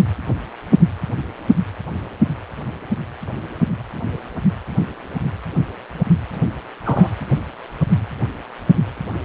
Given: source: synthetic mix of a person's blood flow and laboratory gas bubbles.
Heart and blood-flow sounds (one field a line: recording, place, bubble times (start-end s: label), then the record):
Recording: Doppler ultrasound of blood flow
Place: precordium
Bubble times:
6.85-7.08 s: bubbles
From the record:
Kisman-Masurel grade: 113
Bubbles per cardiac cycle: 1 to 2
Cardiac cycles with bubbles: 1 to 10%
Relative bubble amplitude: loud (0.450 to 0.775)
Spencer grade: 1 (occasional bubble signal discernible with the cardiac motion signal, with majority of cardiac periods free of bubbles)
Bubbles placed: anywhere in the cardiac cycle